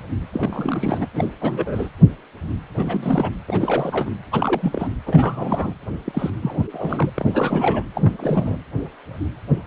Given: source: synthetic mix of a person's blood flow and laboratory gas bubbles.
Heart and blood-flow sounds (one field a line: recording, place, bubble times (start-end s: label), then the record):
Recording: Doppler ultrasound of blood flow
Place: precordium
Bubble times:
0.33-1.06 s: bubbles
1.14-1.28 s: bubbles
1.39-1.89 s: bubbles
2.77-3.31 s: bubbles
3.48-4.10 s: bubbles
4.31-4.88 s: bubbles
5.06-5.73 s: bubbles
6.04-6.30 s: bubbles
6.42-7.09 s: bubbles
7.14-7.83 s: bubbles
7.95-8.56 s: bubbles
From the record:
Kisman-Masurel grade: 332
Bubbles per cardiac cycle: rolling drumbeat, 9 or more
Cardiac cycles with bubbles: 50 to 99%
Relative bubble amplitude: moderate (0.250 to 0.450)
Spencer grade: 3 (all of the cardiac periods contain showers or single bubble signals, but not dominating or overriding the cardiac motion signals)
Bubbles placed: anywhere in the cardiac cycle